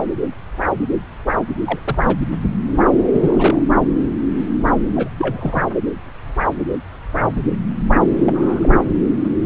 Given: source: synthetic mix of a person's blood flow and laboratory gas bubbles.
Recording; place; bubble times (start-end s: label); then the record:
Doppler ultrasound of blood flow; subclavian vein
1.65-1.79 s: bubbles
1.85-1.97 s: bubbles
2.03-2.17 s: bubbles
3.13-3.62 s: bubbles
4.96-5.08 s: bubbles
5.17-5.63 s: bubbles
8.25-8.95 s: bubbles
From the record:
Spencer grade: 2 (many but less than half of the cardiac periods contain bubble signals, singularly or in groups); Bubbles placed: anywhere in the cardiac cycle